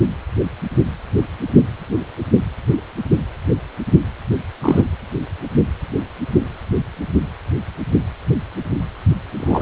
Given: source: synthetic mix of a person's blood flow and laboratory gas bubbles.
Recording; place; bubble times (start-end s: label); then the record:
Doppler ultrasound of blood flow; precordium
4.62-4.82 s: bubbles
9.37-9.62 s: bubbles
From the record:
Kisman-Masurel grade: 113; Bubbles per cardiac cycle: 1 to 2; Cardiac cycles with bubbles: 1 to 10%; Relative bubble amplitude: loud (0.450 to 0.775); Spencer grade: 1 (occasional bubble signal discernible with the cardiac motion signal, with majority of cardiac periods free of bubbles); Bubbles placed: anywhere in the cardiac cycle